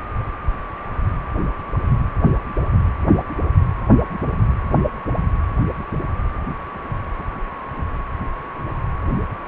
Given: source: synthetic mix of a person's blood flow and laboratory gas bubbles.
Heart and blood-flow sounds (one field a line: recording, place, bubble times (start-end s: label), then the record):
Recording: Doppler ultrasound of blood flow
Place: precordium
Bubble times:
no bubbles
From the record:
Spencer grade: 0 (complete lack of bubble signals)